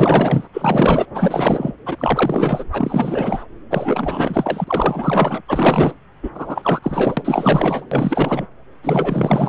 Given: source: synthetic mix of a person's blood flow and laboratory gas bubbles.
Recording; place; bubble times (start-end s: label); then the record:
Doppler ultrasound of blood flow; subclavian vein
0.00-0.48 s: bubbles
0.53-1.05 s: bubbles
1.14-1.72 s: bubbles
1.86-2.64 s: bubbles
2.72-3.44 s: bubbles
3.71-5.42 s: bubbles
5.48-5.95 s: bubbles
6.22-6.31 s: bubbles
6.34-6.79 s: bubbles
6.82-7.86 s: bubbles
7.91-8.46 s: bubbles
8.83-9.49 s: bubbles
From the record:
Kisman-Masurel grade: 444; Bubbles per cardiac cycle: continuous sound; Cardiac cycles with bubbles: 100%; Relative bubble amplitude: maximal (0.775 to 0.999); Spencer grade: 4 (maximum detectable bubble signal sounding continuously throughout systole and diastole of every cardiac period, and overriding the amplitude of the normal cardiac signals); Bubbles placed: anywhere in the cardiac cycle